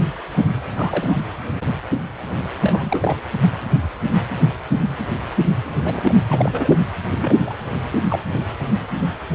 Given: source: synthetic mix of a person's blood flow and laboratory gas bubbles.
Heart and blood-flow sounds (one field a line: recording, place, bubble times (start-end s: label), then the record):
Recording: Doppler ultrasound of blood flow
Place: precordium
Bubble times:
0.69-1.18 s: bubbles
2.61-3.16 s: bubbles
5.79-6.14 s: bubbles
6.29-6.79 s: bubbles
7.11-7.35 s: bubbles
7.46-7.54 s: bubbles
7.92-7.98 s: bubbles
8.09-8.21 s: bubbles
From the record:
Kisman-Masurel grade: 232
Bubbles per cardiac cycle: several, 3 to 8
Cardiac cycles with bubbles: 50 to 99%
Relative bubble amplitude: moderate (0.250 to 0.450)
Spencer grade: 3 (all of the cardiac periods contain showers or single bubble signals, but not dominating or overriding the cardiac motion signals)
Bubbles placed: anywhere in the cardiac cycle